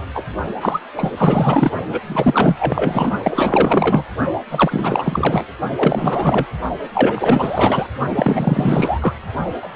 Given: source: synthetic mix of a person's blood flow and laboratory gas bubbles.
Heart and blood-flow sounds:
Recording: Doppler ultrasound of blood flow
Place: precordium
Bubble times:
0.14-0.23 s: bubbles
0.60-0.80 s: bubbles
0.97-1.11 s: bubbles
1.17-1.71 s: bubbles
1.87-2.01 s: bubbles
2.06-3.12 s: bubbles
3.23-4.04 s: bubbles
4.51-5.46 s: bubbles
5.77-6.46 s: bubbles
6.94-7.87 s: bubbles
8.15-9.14 s: bubbles
9.62-9.69 s: bubbles
From the record:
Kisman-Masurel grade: 444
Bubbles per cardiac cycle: continuous sound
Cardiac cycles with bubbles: 100%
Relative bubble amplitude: maximal (0.775 to 0.999)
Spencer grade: 4 (maximum detectable bubble signal sounding continuously throughout systole and diastole of every cardiac period, and overriding the amplitude of the normal cardiac signals)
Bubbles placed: only in the low amplitude regions of the cardiac cycle

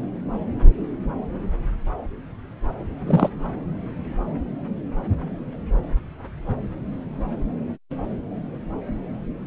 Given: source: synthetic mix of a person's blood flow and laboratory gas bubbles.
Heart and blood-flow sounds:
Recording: Doppler ultrasound of blood flow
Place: subclavian vein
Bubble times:
3.06-3.29 s: bubbles
From the record:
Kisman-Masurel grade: 113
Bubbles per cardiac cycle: 1 to 2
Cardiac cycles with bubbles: 1 to 10%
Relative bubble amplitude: loud (0.450 to 0.775)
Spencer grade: 1 (occasional bubble signal discernible with the cardiac motion signal, with majority of cardiac periods free of bubbles)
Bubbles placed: anywhere in the cardiac cycle

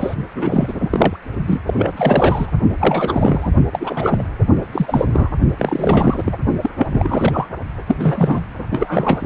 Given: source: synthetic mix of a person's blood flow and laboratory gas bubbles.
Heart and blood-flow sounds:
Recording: Doppler ultrasound of blood flow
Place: precordium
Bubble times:
0.00-0.15 s: bubbles
0.34-1.17 s: bubbles
1.46-1.60 s: bubbles
1.66-1.93 s: bubbles
1.96-2.52 s: bubbles
2.78-3.50 s: bubbles
3.72-4.25 s: bubbles
4.72-5.06 s: bubbles
5.13-5.29 s: bubbles
5.58-6.37 s: bubbles
6.61-6.70 s: bubbles
6.78-7.48 s: bubbles
7.87-8.46 s: bubbles
8.70-9.26 s: bubbles
From the record:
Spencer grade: 3 (all of the cardiac periods contain showers or single bubble signals, but not dominating or overriding the cardiac motion signals)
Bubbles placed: only in the low amplitude regions of the cardiac cycle

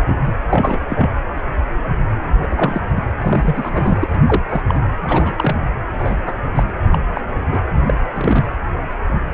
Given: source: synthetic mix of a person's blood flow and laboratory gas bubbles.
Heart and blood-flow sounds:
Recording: Doppler ultrasound of blood flow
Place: precordium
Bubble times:
0.06-0.16 s: bubbles
0.26-0.32 s: bubbles
0.49-0.80 s: bubbles
0.87-1.10 s: bubbles
2.38-2.80 s: bubbles
2.95-3.03 s: bubbles
3.18-4.22 s: bubbles
4.26-4.42 s: bubbles
4.49-4.62 s: bubbles
4.68-4.79 s: bubbles
5.03-5.33 s: bubbles
5.36-5.56 s: bubbles
5.98-6.35 s: bubbles
6.56-6.63 s: bubbles
6.92-6.99 s: bubbles
7.15-7.21 s: bubbles
7.52-7.60 s: bubbles
7.86-7.94 s: bubbles
8.11-8.52 s: bubbles
From the record:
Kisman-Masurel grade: 232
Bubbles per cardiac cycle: several, 3 to 8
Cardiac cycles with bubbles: 50 to 99%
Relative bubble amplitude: moderate (0.250 to 0.450)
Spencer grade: 3 (all of the cardiac periods contain showers or single bubble signals, but not dominating or overriding the cardiac motion signals)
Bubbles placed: anywhere in the cardiac cycle

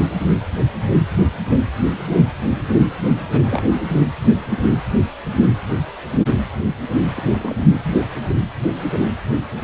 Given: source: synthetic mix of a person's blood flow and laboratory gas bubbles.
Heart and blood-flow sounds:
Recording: Doppler ultrasound of blood flow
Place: precordium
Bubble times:
3.30-3.62 s: bubbles
7.16-7.22 s: bubbles
7.32-7.72 s: bubbles
From the record:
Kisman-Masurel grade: 221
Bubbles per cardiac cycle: several, 3 to 8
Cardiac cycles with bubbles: 10 to 50%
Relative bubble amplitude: barely perceptible (0.100 to 0.250)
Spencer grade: 2 (many but less than half of the cardiac periods contain bubble signals, singularly or in groups)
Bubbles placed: anywhere in the cardiac cycle

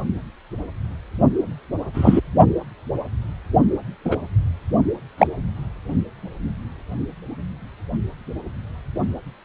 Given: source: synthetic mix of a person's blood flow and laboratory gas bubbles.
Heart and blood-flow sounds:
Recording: Doppler ultrasound of blood flow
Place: precordium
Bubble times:
1.94-2.21 s: bubbles
4.05-4.16 s: bubbles
5.18-5.27 s: bubbles
From the record:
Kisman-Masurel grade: 123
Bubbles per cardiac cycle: 1 to 2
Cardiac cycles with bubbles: 10 to 50%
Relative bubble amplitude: loud (0.450 to 0.775)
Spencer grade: 2 (many but less than half of the cardiac periods contain bubble signals, singularly or in groups)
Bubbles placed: only in the low amplitude regions of the cardiac cycle

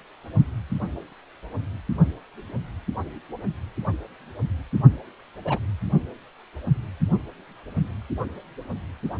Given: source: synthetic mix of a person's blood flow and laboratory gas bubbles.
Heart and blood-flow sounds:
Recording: Doppler ultrasound of blood flow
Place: precordium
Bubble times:
5.45-5.59 s: bubbles
From the record:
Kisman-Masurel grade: 122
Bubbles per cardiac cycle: 1 to 2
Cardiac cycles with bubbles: 10 to 50%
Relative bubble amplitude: moderate (0.250 to 0.450)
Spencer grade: 2 (many but less than half of the cardiac periods contain bubble signals, singularly or in groups)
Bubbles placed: only in the low amplitude regions of the cardiac cycle

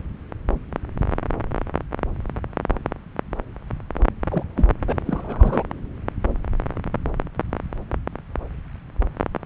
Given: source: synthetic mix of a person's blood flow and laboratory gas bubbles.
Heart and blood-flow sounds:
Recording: Doppler ultrasound of blood flow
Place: subclavian vein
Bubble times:
4.29-4.43 s: bubbles
4.57-4.69 s: bubbles
4.87-4.92 s: bubbles
5.05-5.63 s: bubbles
From the record:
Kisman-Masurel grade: 222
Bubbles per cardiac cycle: several, 3 to 8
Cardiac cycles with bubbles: 10 to 50%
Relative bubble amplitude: moderate (0.250 to 0.450)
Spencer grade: 2 (many but less than half of the cardiac periods contain bubble signals, singularly or in groups)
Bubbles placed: anywhere in the cardiac cycle

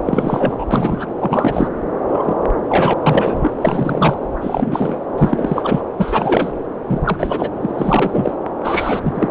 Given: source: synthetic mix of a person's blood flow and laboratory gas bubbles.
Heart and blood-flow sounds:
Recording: Doppler ultrasound of blood flow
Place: subclavian vein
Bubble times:
0.05-0.65 s: bubbles
0.71-1.06 s: bubbles
1.19-1.68 s: bubbles
2.08-2.38 s: bubbles
2.67-2.93 s: bubbles
3.02-3.50 s: bubbles
3.60-4.25 s: bubbles
4.41-5.00 s: bubbles
5.17-5.81 s: bubbles
5.97-6.52 s: bubbles
6.88-7.50 s: bubbles
7.61-8.36 s: bubbles
8.62-9.29 s: bubbles
From the record:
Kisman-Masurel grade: 343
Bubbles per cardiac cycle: rolling drumbeat, 9 or more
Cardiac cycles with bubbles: 100%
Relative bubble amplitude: loud (0.450 to 0.775)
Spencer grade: 3 (all of the cardiac periods contain showers or single bubble signals, but not dominating or overriding the cardiac motion signals)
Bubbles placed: anywhere in the cardiac cycle

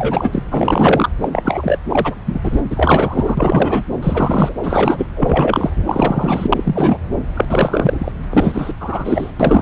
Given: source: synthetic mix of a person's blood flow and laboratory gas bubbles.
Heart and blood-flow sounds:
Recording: Doppler ultrasound of blood flow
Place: subclavian vein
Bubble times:
0.00-0.43 s: bubbles
0.51-1.09 s: bubbles
1.21-1.29 s: bubbles
1.32-1.78 s: bubbles
1.89-2.15 s: bubbles
2.26-2.40 s: bubbles
2.43-2.61 s: bubbles
2.70-3.85 s: bubbles
3.99-4.54 s: bubbles
4.63-5.07 s: bubbles
5.16-5.70 s: bubbles
5.87-6.98 s: bubbles
7.34-7.45 s: bubbles
7.48-8.12 s: bubbles
8.29-8.73 s: bubbles
8.80-9.32 s: bubbles
9.39-9.62 s: bubbles
From the record:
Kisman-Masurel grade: 343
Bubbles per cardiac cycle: rolling drumbeat, 9 or more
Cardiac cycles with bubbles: 100%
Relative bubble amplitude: loud (0.450 to 0.775)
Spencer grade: 3 (all of the cardiac periods contain showers or single bubble signals, but not dominating or overriding the cardiac motion signals)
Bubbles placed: anywhere in the cardiac cycle

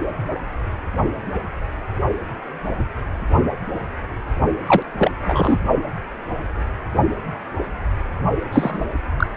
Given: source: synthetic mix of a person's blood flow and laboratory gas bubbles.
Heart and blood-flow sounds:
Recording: Doppler ultrasound of blood flow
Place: precordium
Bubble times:
4.67-4.83 s: bubbles
4.98-5.11 s: bubbles
5.25-5.58 s: bubbles
8.52-8.86 s: bubbles
9.17-9.27 s: bubbles
From the record:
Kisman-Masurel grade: 223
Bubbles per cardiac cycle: several, 3 to 8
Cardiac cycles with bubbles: 10 to 50%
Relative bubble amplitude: loud (0.450 to 0.775)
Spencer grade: 2 (many but less than half of the cardiac periods contain bubble signals, singularly or in groups)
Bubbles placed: only in the low amplitude regions of the cardiac cycle

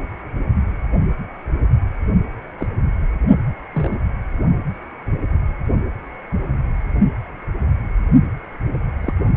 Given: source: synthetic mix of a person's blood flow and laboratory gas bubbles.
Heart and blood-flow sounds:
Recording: Doppler ultrasound of blood flow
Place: precordium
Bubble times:
2.59-2.67 s: bubbles
3.73-3.97 s: bubbles
9.01-9.14 s: bubbles
From the record:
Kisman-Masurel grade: 122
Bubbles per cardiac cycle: 1 to 2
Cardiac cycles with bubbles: 10 to 50%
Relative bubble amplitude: moderate (0.250 to 0.450)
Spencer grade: 2 (many but less than half of the cardiac periods contain bubble signals, singularly or in groups)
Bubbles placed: only in the low amplitude regions of the cardiac cycle

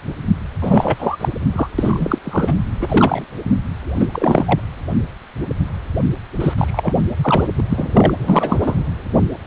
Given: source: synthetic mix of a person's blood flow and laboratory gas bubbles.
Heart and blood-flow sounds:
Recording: Doppler ultrasound of blood flow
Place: precordium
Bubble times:
0.61-1.17 s: bubbles
1.19-1.29 s: bubbles
1.53-1.68 s: bubbles
1.78-2.19 s: bubbles
2.23-2.56 s: bubbles
2.79-3.24 s: bubbles
3.44-3.50 s: bubbles
3.96-4.07 s: bubbles
4.12-4.60 s: bubbles
6.40-6.54 s: bubbles
6.58-6.93 s: bubbles
7.23-7.47 s: bubbles
7.56-7.64 s: bubbles
7.70-8.15 s: bubbles
8.28-8.76 s: bubbles
From the record:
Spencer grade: 3 (all of the cardiac periods contain showers or single bubble signals, but not dominating or overriding the cardiac motion signals)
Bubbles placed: anywhere in the cardiac cycle

